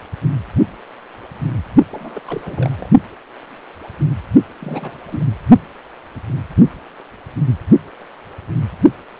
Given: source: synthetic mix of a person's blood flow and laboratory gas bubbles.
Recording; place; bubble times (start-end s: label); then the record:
Doppler ultrasound of blood flow; precordium
1.91-2.19 s: bubbles
2.26-2.90 s: bubbles
4.60-4.92 s: bubbles
5.07-5.25 s: bubbles
From the record:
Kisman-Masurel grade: 221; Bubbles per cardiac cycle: several, 3 to 8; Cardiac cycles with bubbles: 10 to 50%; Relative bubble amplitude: barely perceptible (0.100 to 0.250); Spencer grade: 2 (many but less than half of the cardiac periods contain bubble signals, singularly or in groups); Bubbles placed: only in the low amplitude regions of the cardiac cycle